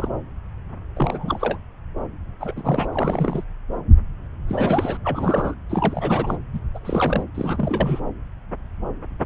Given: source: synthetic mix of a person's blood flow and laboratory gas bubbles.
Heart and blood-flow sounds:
Doppler ultrasound of blood flow; subclavian vein
0.00-0.08 s: bubbles
0.97-1.58 s: bubbles
2.40-2.86 s: bubbles
2.92-3.44 s: bubbles
4.48-4.97 s: bubbles
5.04-5.55 s: bubbles
5.69-6.38 s: bubbles
6.53-6.59 s: bubbles
6.74-6.79 s: bubbles
6.81-7.23 s: bubbles
7.34-8.00 s: bubbles
From the record:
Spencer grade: 3 (all of the cardiac periods contain showers or single bubble signals, but not dominating or overriding the cardiac motion signals); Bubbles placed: anywhere in the cardiac cycle

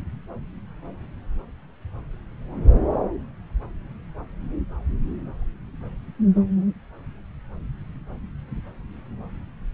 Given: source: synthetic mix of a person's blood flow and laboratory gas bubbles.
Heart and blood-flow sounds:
Doppler ultrasound of blood flow; subclavian vein
no bubbles
From the record:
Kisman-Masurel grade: 000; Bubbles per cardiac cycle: 0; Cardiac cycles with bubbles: 0%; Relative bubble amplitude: no bubbles discernible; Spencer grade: 0 (complete lack of bubble signals)

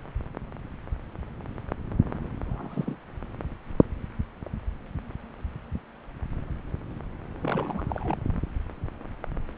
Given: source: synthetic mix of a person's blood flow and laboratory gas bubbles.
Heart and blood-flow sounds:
Doppler ultrasound of blood flow; subclavian vein
2.45-2.97 s: bubbles
7.41-7.86 s: bubbles
7.90-8.18 s: bubbles
From the record:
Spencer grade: 2 (many but less than half of the cardiac periods contain bubble signals, singularly or in groups); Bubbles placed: anywhere in the cardiac cycle

